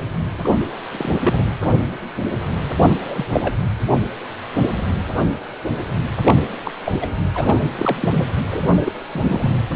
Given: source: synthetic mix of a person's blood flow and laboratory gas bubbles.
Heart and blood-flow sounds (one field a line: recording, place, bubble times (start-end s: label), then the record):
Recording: Doppler ultrasound of blood flow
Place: precordium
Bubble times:
0.44-0.54 s: bubbles
0.91-1.12 s: bubbles
1.24-1.44 s: bubbles
2.76-2.90 s: bubbles
3.02-3.26 s: bubbles
3.32-3.54 s: bubbles
6.25-6.34 s: bubbles
6.64-6.72 s: bubbles
6.84-6.92 s: bubbles
7.01-7.07 s: bubbles
7.34-7.56 s: bubbles
7.77-7.96 s: bubbles
8.01-8.10 s: bubbles
8.12-8.25 s: bubbles
8.51-8.68 s: bubbles
8.80-8.92 s: bubbles
9.11-9.50 s: bubbles
From the record:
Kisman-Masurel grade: 222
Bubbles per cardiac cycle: several, 3 to 8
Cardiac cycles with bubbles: 10 to 50%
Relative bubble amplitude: moderate (0.250 to 0.450)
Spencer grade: 2 (many but less than half of the cardiac periods contain bubble signals, singularly or in groups)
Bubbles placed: anywhere in the cardiac cycle